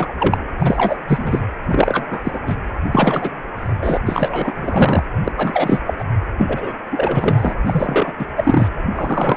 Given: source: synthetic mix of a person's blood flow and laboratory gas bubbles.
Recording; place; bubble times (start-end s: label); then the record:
Doppler ultrasound of blood flow; precordium
0.00-0.13 s: bubbles
0.18-0.38 s: bubbles
0.59-0.97 s: bubbles
1.07-1.40 s: bubbles
1.69-2.07 s: bubbles
2.10-2.21 s: bubbles
2.24-2.38 s: bubbles
2.46-2.55 s: bubbles
2.91-3.30 s: bubbles
3.58-3.97 s: bubbles
4.05-4.54 s: bubbles
4.56-5.03 s: bubbles
5.24-5.32 s: bubbles
5.36-5.80 s: bubbles
5.86-5.94 s: bubbles
5.98-6.04 s: bubbles
6.36-6.72 s: bubbles
6.92-7.53 s: bubbles
7.65-8.13 s: bubbles
8.19-8.26 s: bubbles
8.37-8.68 s: bubbles
8.94-9.37 s: bubbles
From the record:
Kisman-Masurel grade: 333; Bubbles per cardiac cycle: rolling drumbeat, 9 or more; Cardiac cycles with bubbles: 50 to 99%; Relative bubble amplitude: loud (0.450 to 0.775); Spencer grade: 3 (all of the cardiac periods contain showers or single bubble signals, but not dominating or overriding the cardiac motion signals); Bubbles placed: anywhere in the cardiac cycle